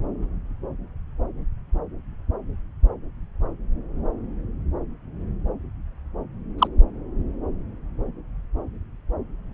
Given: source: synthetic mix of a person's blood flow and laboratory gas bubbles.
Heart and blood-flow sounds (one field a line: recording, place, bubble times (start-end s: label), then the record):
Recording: Doppler ultrasound of blood flow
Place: subclavian vein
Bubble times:
6.58-6.67 s: bubbles
From the record:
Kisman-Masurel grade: 113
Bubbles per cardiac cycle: 1 to 2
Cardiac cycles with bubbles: 1 to 10%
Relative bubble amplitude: loud (0.450 to 0.775)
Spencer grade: 1 (occasional bubble signal discernible with the cardiac motion signal, with majority of cardiac periods free of bubbles)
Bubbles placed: anywhere in the cardiac cycle